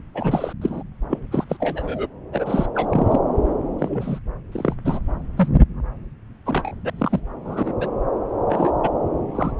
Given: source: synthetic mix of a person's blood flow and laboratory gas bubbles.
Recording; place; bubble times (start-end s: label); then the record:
Doppler ultrasound of blood flow; subclavian vein
0.14-0.53 s: bubbles
0.61-0.83 s: bubbles
1.09-1.19 s: bubbles
1.31-1.44 s: bubbles
1.49-1.57 s: bubbles
1.60-2.07 s: bubbles
2.32-2.67 s: bubbles
2.75-3.19 s: bubbles
3.79-4.20 s: bubbles
4.52-4.74 s: bubbles
4.85-5.00 s: bubbles
5.36-5.48 s: bubbles
6.46-6.72 s: bubbles
6.84-6.90 s: bubbles
6.98-7.20 s: bubbles
7.45-7.74 s: bubbles
7.80-7.88 s: bubbles
8.49-8.71 s: bubbles
8.83-8.90 s: bubbles
9.35-9.52 s: bubbles
From the record:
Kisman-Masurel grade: 242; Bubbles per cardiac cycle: several, 3 to 8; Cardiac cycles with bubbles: 100%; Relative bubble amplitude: moderate (0.250 to 0.450); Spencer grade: 3 (all of the cardiac periods contain showers or single bubble signals, but not dominating or overriding the cardiac motion signals); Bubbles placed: anywhere in the cardiac cycle